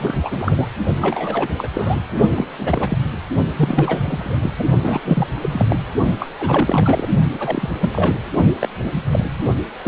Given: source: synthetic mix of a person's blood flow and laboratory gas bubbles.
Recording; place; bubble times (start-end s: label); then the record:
Doppler ultrasound of blood flow; precordium
0.00-0.68 s: bubbles
1.00-1.48 s: bubbles
1.57-1.68 s: bubbles
1.73-1.99 s: bubbles
2.29-2.46 s: bubbles
2.58-2.98 s: bubbles
3.56-4.51 s: bubbles
4.58-4.64 s: bubbles
4.82-5.01 s: bubbles
5.04-5.27 s: bubbles
5.41-5.79 s: bubbles
6.20-6.28 s: bubbles
6.39-7.09 s: bubbles
7.31-7.77 s: bubbles
7.81-8.18 s: bubbles
8.61-8.69 s: bubbles
8.84-8.92 s: bubbles
9.12-9.25 s: bubbles
9.84-9.88 s: bubbles
From the record:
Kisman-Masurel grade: 342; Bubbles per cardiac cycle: rolling drumbeat, 9 or more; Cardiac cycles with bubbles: 100%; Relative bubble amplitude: moderate (0.250 to 0.450); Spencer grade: 3 (all of the cardiac periods contain showers or single bubble signals, but not dominating or overriding the cardiac motion signals); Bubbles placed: only in the low amplitude regions of the cardiac cycle